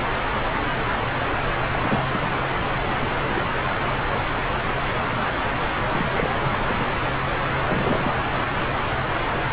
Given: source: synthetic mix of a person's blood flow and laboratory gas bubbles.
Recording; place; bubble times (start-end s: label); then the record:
Doppler ultrasound of blood flow; subclavian vein
1.72-2.07 s: bubbles
2.12-2.29 s: bubbles
2.99-3.08 s: bubbles
3.29-3.43 s: bubbles
5.87-6.29 s: bubbles
6.34-6.37 s: bubbles
6.42-6.63 s: bubbles
6.67-7.09 s: bubbles
7.67-8.12 s: bubbles
From the record:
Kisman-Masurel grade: 221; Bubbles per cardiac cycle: several, 3 to 8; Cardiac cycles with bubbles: 10 to 50%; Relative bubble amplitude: barely perceptible (0.100 to 0.250); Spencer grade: 2 (many but less than half of the cardiac periods contain bubble signals, singularly or in groups); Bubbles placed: anywhere in the cardiac cycle